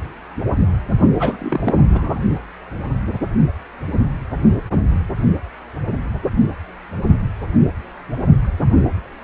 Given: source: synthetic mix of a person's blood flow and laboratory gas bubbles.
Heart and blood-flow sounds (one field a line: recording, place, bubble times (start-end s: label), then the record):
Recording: Doppler ultrasound of blood flow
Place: precordium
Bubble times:
1.19-1.74 s: bubbles
1.91-2.20 s: bubbles
From the record:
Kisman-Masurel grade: 212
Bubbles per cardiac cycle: several, 3 to 8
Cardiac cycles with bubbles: 1 to 10%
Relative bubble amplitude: moderate (0.250 to 0.450)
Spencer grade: 1 (occasional bubble signal discernible with the cardiac motion signal, with majority of cardiac periods free of bubbles)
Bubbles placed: only in the low amplitude regions of the cardiac cycle